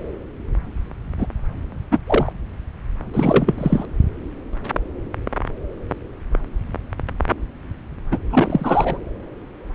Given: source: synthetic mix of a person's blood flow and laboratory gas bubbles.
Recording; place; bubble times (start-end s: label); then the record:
Doppler ultrasound of blood flow; subclavian vein
1.18-1.27 s: bubbles
1.91-1.99 s: bubbles
2.06-2.33 s: bubbles
3.14-3.55 s: bubbles
3.58-3.86 s: bubbles
8.12-8.19 s: bubbles
8.30-8.98 s: bubbles
From the record:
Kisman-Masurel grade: 223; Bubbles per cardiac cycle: several, 3 to 8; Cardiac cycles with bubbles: 10 to 50%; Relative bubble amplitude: loud (0.450 to 0.775); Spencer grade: 2 (many but less than half of the cardiac periods contain bubble signals, singularly or in groups); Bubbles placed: anywhere in the cardiac cycle